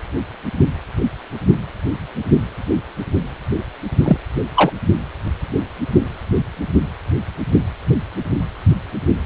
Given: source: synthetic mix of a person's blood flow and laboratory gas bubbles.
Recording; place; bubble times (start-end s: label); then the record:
Doppler ultrasound of blood flow; precordium
4.04-4.17 s: bubbles
4.56-4.71 s: bubbles
From the record:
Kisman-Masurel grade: 113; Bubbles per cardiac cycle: 1 to 2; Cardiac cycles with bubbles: 1 to 10%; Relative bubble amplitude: loud (0.450 to 0.775); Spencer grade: 1 (occasional bubble signal discernible with the cardiac motion signal, with majority of cardiac periods free of bubbles); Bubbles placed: only in the low amplitude regions of the cardiac cycle